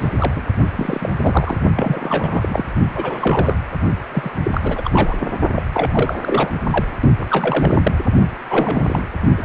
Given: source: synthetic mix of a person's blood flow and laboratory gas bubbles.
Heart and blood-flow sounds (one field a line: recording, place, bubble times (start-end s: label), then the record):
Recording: Doppler ultrasound of blood flow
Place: precordium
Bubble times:
0.00-0.12 s: bubbles
0.19-0.32 s: bubbles
0.35-0.42 s: bubbles
0.76-1.10 s: bubbles
1.22-1.57 s: bubbles
1.76-2.73 s: bubbles
2.95-3.56 s: bubbles
4.12-4.32 s: bubbles
4.44-5.33 s: bubbles
5.55-5.62 s: bubbles
5.74-6.16 s: bubbles
6.21-6.61 s: bubbles
6.71-6.85 s: bubbles
7.19-7.92 s: bubbles
8.49-9.04 s: bubbles
9.37-9.45 s: bubbles
From the record:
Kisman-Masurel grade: 342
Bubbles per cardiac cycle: rolling drumbeat, 9 or more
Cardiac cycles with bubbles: 100%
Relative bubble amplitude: moderate (0.250 to 0.450)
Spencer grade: 3 (all of the cardiac periods contain showers or single bubble signals, but not dominating or overriding the cardiac motion signals)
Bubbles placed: only in the low amplitude regions of the cardiac cycle